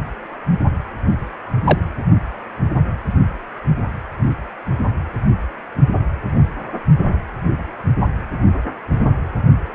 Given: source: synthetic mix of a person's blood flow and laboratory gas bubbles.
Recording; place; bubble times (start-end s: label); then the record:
Doppler ultrasound of blood flow; precordium
1.64-1.78 s: bubbles
From the record:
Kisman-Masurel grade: 123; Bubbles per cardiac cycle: 1 to 2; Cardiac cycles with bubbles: 10 to 50%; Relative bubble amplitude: loud (0.450 to 0.775); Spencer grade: 2 (many but less than half of the cardiac periods contain bubble signals, singularly or in groups); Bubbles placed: only in the low amplitude regions of the cardiac cycle